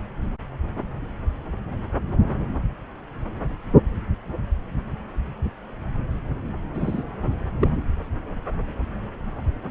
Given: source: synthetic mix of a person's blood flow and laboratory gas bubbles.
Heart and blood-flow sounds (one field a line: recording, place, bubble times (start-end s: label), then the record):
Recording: Doppler ultrasound of blood flow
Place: subclavian vein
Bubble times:
6.74-7.03 s: bubbles
7.61-7.68 s: bubbles
From the record:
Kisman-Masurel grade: 122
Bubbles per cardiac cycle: 1 to 2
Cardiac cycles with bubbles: 10 to 50%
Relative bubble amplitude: moderate (0.250 to 0.450)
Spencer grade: 2 (many but less than half of the cardiac periods contain bubble signals, singularly or in groups)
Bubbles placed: anywhere in the cardiac cycle